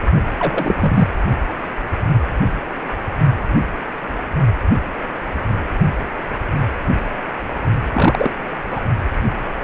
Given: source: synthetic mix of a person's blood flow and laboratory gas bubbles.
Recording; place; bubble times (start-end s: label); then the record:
Doppler ultrasound of blood flow; precordium
0.39-1.08 s: bubbles
7.93-8.31 s: bubbles
8.70-8.80 s: bubbles
From the record:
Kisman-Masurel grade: 223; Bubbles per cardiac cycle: several, 3 to 8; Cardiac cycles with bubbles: 10 to 50%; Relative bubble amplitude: loud (0.450 to 0.775); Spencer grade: 2 (many but less than half of the cardiac periods contain bubble signals, singularly or in groups); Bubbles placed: only in the low amplitude regions of the cardiac cycle